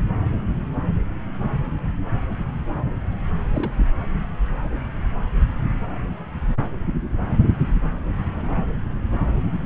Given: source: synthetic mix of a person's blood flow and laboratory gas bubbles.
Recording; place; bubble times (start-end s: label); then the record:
Doppler ultrasound of blood flow; subclavian vein
3.54-3.88 s: bubbles
From the record:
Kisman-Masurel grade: 211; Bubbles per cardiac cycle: several, 3 to 8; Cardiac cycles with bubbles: 1 to 10%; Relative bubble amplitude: barely perceptible (0.100 to 0.250); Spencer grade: 1 (occasional bubble signal discernible with the cardiac motion signal, with majority of cardiac periods free of bubbles); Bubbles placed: anywhere in the cardiac cycle